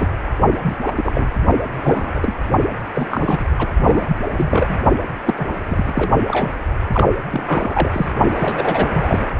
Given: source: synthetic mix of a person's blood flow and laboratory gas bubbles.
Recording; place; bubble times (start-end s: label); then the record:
Doppler ultrasound of blood flow; precordium
0.00-0.08 s: bubbles
0.62-0.77 s: bubbles
0.86-0.92 s: bubbles
0.95-1.40 s: bubbles
1.77-2.33 s: bubbles
2.95-3.07 s: bubbles
3.10-3.46 s: bubbles
3.58-3.70 s: bubbles
3.79-4.17 s: bubbles
4.37-4.78 s: bubbles
5.25-5.34 s: bubbles
5.38-5.46 s: bubbles
5.68-6.10 s: bubbles
6.28-6.51 s: bubbles
6.93-7.07 s: bubbles
7.30-7.90 s: bubbles
7.93-8.09 s: bubbles
8.37-8.88 s: bubbles
8.93-9.27 s: bubbles
From the record:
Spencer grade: 3 (all of the cardiac periods contain showers or single bubble signals, but not dominating or overriding the cardiac motion signals); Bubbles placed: only in the low amplitude regions of the cardiac cycle